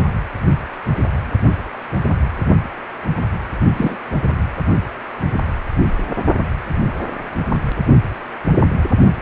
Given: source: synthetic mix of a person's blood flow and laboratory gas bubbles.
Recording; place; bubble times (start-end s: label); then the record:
Doppler ultrasound of blood flow; precordium
3.76-3.96 s: bubbles
From the record:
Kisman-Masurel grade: 122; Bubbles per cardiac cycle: 1 to 2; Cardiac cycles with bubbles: 10 to 50%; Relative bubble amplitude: moderate (0.250 to 0.450); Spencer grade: 2 (many but less than half of the cardiac periods contain bubble signals, singularly or in groups); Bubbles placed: only in the low amplitude regions of the cardiac cycle